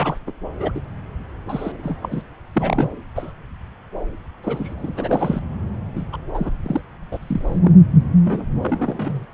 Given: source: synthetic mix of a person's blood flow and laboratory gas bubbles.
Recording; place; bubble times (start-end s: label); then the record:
Doppler ultrasound of blood flow; subclavian vein
0.00-0.17 s: bubbles
0.27-0.32 s: bubbles
0.60-0.72 s: bubbles
0.75-0.81 s: bubbles
1.46-1.72 s: bubbles
1.83-2.22 s: bubbles
2.53-2.93 s: bubbles
3.15-3.32 s: bubbles
4.43-4.74 s: bubbles
4.77-5.40 s: bubbles
5.95-6.04 s: bubbles
6.12-6.17 s: bubbles
6.33-6.50 s: bubbles
6.63-6.81 s: bubbles
7.12-7.59 s: bubbles
7.62-7.72 s: bubbles
8.24-8.46 s: bubbles
8.62-9.26 s: bubbles
From the record:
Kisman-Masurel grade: 332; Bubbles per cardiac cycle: rolling drumbeat, 9 or more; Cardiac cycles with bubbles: 50 to 99%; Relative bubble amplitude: moderate (0.250 to 0.450); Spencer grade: 3 (all of the cardiac periods contain showers or single bubble signals, but not dominating or overriding the cardiac motion signals); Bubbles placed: anywhere in the cardiac cycle